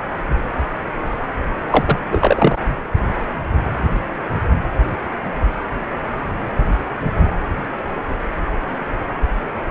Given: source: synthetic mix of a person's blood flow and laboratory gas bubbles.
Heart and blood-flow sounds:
Doppler ultrasound of blood flow; precordium
1.71-1.99 s: bubbles
2.11-2.60 s: bubbles
From the record:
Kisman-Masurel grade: 223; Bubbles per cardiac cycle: several, 3 to 8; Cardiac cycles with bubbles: 10 to 50%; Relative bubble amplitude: loud (0.450 to 0.775); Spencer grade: 2 (many but less than half of the cardiac periods contain bubble signals, singularly or in groups); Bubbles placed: anywhere in the cardiac cycle

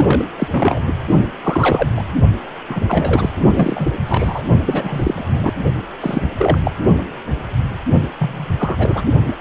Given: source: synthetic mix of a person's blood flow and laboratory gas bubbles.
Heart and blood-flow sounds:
Doppler ultrasound of blood flow; precordium
0.00-0.25 s: bubbles
0.39-0.47 s: bubbles
0.51-0.80 s: bubbles
1.43-1.90 s: bubbles
1.97-2.03 s: bubbles
2.69-2.80 s: bubbles
2.88-3.31 s: bubbles
3.55-3.91 s: bubbles
4.05-4.42 s: bubbles
4.66-5.53 s: bubbles
6.00-6.23 s: bubbles
6.37-6.59 s: bubbles
6.64-6.71 s: bubbles
8.18-8.46 s: bubbles
8.59-9.02 s: bubbles
9.24-9.35 s: bubbles
From the record:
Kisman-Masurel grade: 233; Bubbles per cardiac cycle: several, 3 to 8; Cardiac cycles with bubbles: 50 to 99%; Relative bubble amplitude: loud (0.450 to 0.775); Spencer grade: 3 (all of the cardiac periods contain showers or single bubble signals, but not dominating or overriding the cardiac motion signals); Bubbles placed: only in the low amplitude regions of the cardiac cycle

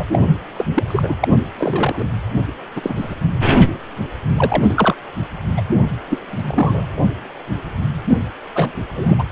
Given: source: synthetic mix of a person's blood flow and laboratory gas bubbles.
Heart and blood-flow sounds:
Doppler ultrasound of blood flow; precordium
0.00-0.19 s: bubbles
0.22-0.40 s: bubbles
0.56-0.65 s: bubbles
0.74-0.83 s: bubbles
0.88-1.14 s: bubbles
1.21-1.28 s: bubbles
1.59-2.04 s: bubbles
2.75-3.16 s: bubbles
4.37-4.74 s: bubbles
4.77-4.95 s: bubbles
5.57-5.61 s: bubbles
6.08-6.86 s: bubbles
8.07-8.18 s: bubbles
8.54-8.74 s: bubbles
8.96-9.15 s: bubbles
9.18-9.25 s: bubbles
From the record:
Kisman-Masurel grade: 232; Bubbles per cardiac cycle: several, 3 to 8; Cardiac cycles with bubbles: 50 to 99%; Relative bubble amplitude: moderate (0.250 to 0.450); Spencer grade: 3 (all of the cardiac periods contain showers or single bubble signals, but not dominating or overriding the cardiac motion signals); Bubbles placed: anywhere in the cardiac cycle

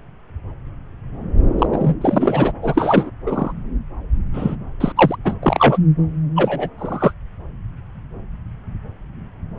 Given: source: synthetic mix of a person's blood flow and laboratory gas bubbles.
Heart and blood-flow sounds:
Doppler ultrasound of blood flow; subclavian vein
1.58-1.67 s: bubbles
1.72-1.94 s: bubbles
2.00-2.52 s: bubbles
2.62-3.10 s: bubbles
3.26-3.52 s: bubbles
4.33-4.55 s: bubbles
4.80-4.92 s: bubbles
4.96-5.17 s: bubbles
5.24-5.34 s: bubbles
5.42-5.78 s: bubbles
6.35-6.69 s: bubbles
6.78-7.13 s: bubbles
From the record:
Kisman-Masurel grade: 233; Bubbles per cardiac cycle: several, 3 to 8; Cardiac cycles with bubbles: 50 to 99%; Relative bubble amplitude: loud (0.450 to 0.775); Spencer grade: 3 (all of the cardiac periods contain showers or single bubble signals, but not dominating or overriding the cardiac motion signals); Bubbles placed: anywhere in the cardiac cycle

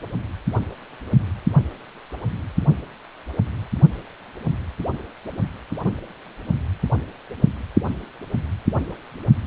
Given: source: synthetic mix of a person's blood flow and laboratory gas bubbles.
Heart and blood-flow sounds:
Doppler ultrasound of blood flow; precordium
no bubbles
From the record:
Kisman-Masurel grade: 000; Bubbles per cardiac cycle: 0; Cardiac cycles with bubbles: 0%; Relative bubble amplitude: no bubbles discernible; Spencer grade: 0 (complete lack of bubble signals)

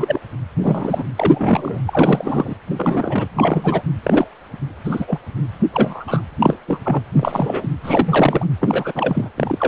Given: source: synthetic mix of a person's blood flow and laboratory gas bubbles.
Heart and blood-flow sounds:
Doppler ultrasound of blood flow; precordium
0.00-0.20 s: bubbles
0.62-1.03 s: bubbles
1.17-1.78 s: bubbles
1.87-2.55 s: bubbles
2.67-3.28 s: bubbles
3.34-3.82 s: bubbles
4.03-4.27 s: bubbles
4.84-5.18 s: bubbles
5.72-6.22 s: bubbles
6.39-6.56 s: bubbles
6.67-6.79 s: bubbles
6.83-7.01 s: bubbles
7.13-7.68 s: bubbles
7.83-8.46 s: bubbles
8.60-8.92 s: bubbles
8.95-9.29 s: bubbles
9.36-9.68 s: bubbles
From the record:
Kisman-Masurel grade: 243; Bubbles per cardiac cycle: several, 3 to 8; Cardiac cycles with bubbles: 100%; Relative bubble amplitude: loud (0.450 to 0.775); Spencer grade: 3 (all of the cardiac periods contain showers or single bubble signals, but not dominating or overriding the cardiac motion signals); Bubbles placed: anywhere in the cardiac cycle

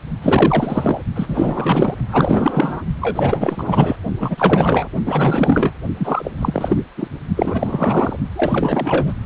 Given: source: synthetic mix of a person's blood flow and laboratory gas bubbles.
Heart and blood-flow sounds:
Doppler ultrasound of blood flow; precordium
0.21-1.02 s: bubbles
1.15-1.95 s: bubbles
2.12-2.83 s: bubbles
3.00-3.96 s: bubbles
4.19-4.89 s: bubbles
5.05-5.71 s: bubbles
5.98-6.31 s: bubbles
6.41-6.84 s: bubbles
6.97-7.07 s: bubbles
7.35-8.16 s: bubbles
8.36-9.13 s: bubbles
From the record:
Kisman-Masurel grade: 444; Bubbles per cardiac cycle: continuous sound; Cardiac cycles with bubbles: 100%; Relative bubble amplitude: maximal (0.775 to 0.999); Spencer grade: 4 (maximum detectable bubble signal sounding continuously throughout systole and diastole of every cardiac period, and overriding the amplitude of the normal cardiac signals); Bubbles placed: only in the low amplitude regions of the cardiac cycle

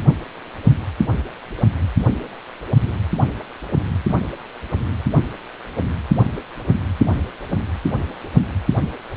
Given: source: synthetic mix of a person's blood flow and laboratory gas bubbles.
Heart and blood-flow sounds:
Doppler ultrasound of blood flow; precordium
no bubbles
From the record:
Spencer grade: 0 (complete lack of bubble signals)

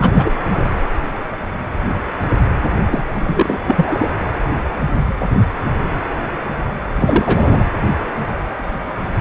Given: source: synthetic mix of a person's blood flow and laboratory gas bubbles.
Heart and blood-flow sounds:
Doppler ultrasound of blood flow; precordium
0.00-0.12 s: bubbles
0.15-0.32 s: bubbles
0.44-0.75 s: bubbles
2.91-3.04 s: bubbles
3.13-3.58 s: bubbles
3.67-4.14 s: bubbles
7.00-7.64 s: bubbles
From the record:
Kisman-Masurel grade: 223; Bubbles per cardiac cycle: several, 3 to 8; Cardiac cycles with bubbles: 10 to 50%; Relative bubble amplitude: loud (0.450 to 0.775); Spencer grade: 2 (many but less than half of the cardiac periods contain bubble signals, singularly or in groups); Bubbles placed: anywhere in the cardiac cycle

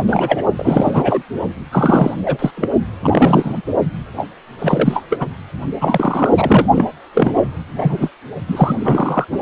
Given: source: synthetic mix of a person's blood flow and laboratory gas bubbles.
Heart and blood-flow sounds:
Doppler ultrasound of blood flow; precordium
0.00-0.42 s: bubbles
0.56-1.22 s: bubbles
1.71-2.14 s: bubbles
2.25-2.50 s: bubbles
2.57-2.69 s: bubbles
3.03-3.62 s: bubbles
4.16-4.27 s: bubbles
4.58-5.04 s: bubbles
5.10-5.26 s: bubbles
5.80-6.29 s: bubbles
6.37-6.66 s: bubbles
6.75-6.86 s: bubbles
7.14-7.47 s: bubbles
7.73-8.10 s: bubbles
8.48-8.76 s: bubbles
8.79-9.25 s: bubbles
9.31-9.39 s: bubbles
From the record:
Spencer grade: 3 (all of the cardiac periods contain showers or single bubble signals, but not dominating or overriding the cardiac motion signals); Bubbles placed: only in the low amplitude regions of the cardiac cycle

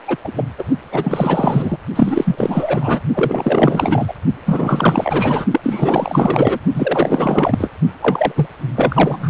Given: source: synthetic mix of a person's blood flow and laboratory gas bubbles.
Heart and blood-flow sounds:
Doppler ultrasound of blood flow; precordium
0.08-0.16 s: bubbles
0.24-0.33 s: bubbles
0.36-0.46 s: bubbles
0.58-0.64 s: bubbles
0.92-1.77 s: bubbles
1.95-3.01 s: bubbles
3.14-4.13 s: bubbles
4.46-5.46 s: bubbles
5.51-5.60 s: bubbles
5.63-6.59 s: bubbles
6.74-7.71 s: bubbles
8.01-8.32 s: bubbles
8.35-8.46 s: bubbles
8.76-9.30 s: bubbles
From the record:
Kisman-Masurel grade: 444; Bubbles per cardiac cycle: continuous sound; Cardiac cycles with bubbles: 100%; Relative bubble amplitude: maximal (0.775 to 0.999); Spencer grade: 4 (maximum detectable bubble signal sounding continuously throughout systole and diastole of every cardiac period, and overriding the amplitude of the normal cardiac signals); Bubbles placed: only in the low amplitude regions of the cardiac cycle

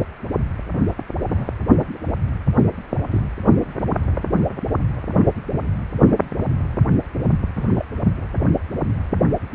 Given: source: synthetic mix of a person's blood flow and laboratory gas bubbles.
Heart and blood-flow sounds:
Doppler ultrasound of blood flow; precordium
1.32-1.48 s: bubbles
2.59-2.66 s: bubbles
3.12-3.20 s: bubbles
7.55-7.85 s: bubbles
From the record:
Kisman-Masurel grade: 121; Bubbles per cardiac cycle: 1 to 2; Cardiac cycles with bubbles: 10 to 50%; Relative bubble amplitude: barely perceptible (0.100 to 0.250); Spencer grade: 2 (many but less than half of the cardiac periods contain bubble signals, singularly or in groups); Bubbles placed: anywhere in the cardiac cycle

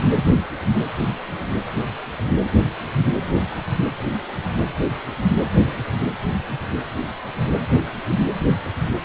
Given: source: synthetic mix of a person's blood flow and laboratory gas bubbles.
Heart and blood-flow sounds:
Doppler ultrasound of blood flow; precordium
0.00-0.02 s: bubbles
0.14-0.22 s: bubbles
From the record:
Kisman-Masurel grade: 212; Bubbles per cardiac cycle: several, 3 to 8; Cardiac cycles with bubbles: 1 to 10%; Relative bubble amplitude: moderate (0.250 to 0.450); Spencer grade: 1 (occasional bubble signal discernible with the cardiac motion signal, with majority of cardiac periods free of bubbles); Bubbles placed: anywhere in the cardiac cycle

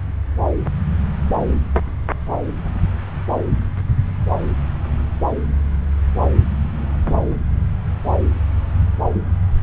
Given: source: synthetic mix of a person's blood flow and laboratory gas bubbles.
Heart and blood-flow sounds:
Doppler ultrasound of blood flow; subclavian vein
no bubbles
From the record:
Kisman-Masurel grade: 000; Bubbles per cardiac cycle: 0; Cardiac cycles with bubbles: 0%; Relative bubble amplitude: no bubbles discernible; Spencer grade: 0 (complete lack of bubble signals)

